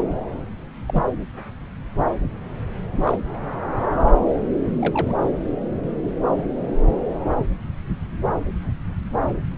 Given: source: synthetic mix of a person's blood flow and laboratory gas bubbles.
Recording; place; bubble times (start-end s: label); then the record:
Doppler ultrasound of blood flow; subclavian vein
0.88-1.06 s: bubbles
3.03-3.17 s: bubbles
4.74-5.13 s: bubbles
From the record:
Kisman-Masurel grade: 121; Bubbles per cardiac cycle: 1 to 2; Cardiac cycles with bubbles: 10 to 50%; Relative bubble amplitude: barely perceptible (0.100 to 0.250); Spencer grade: 2 (many but less than half of the cardiac periods contain bubble signals, singularly or in groups); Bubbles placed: anywhere in the cardiac cycle